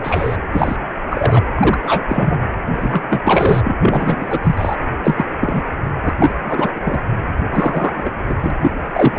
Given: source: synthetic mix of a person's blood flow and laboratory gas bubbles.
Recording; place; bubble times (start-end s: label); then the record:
Doppler ultrasound of blood flow; precordium
0.00-0.37 s: bubbles
0.52-0.76 s: bubbles
1.10-1.44 s: bubbles
1.54-2.40 s: bubbles
2.73-3.02 s: bubbles
3.10-3.22 s: bubbles
3.25-3.75 s: bubbles
3.81-4.25 s: bubbles
4.30-4.40 s: bubbles
4.43-4.76 s: bubbles
5.03-5.25 s: bubbles
5.40-5.62 s: bubbles
6.03-6.13 s: bubbles
6.22-6.33 s: bubbles
6.44-6.70 s: bubbles
6.74-7.03 s: bubbles
7.50-8.12 s: bubbles
8.29-8.35 s: bubbles
8.42-8.51 s: bubbles
8.62-8.71 s: bubbles
8.94-9.19 s: bubbles
From the record:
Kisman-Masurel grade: 243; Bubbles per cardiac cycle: several, 3 to 8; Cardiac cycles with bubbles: 100%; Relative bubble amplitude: loud (0.450 to 0.775); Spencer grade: 3 (all of the cardiac periods contain showers or single bubble signals, but not dominating or overriding the cardiac motion signals); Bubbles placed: anywhere in the cardiac cycle